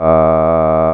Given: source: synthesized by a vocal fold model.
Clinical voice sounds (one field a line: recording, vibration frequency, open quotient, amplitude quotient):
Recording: sustained vowel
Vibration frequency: 80 Hz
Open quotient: 0.3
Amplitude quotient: 1.2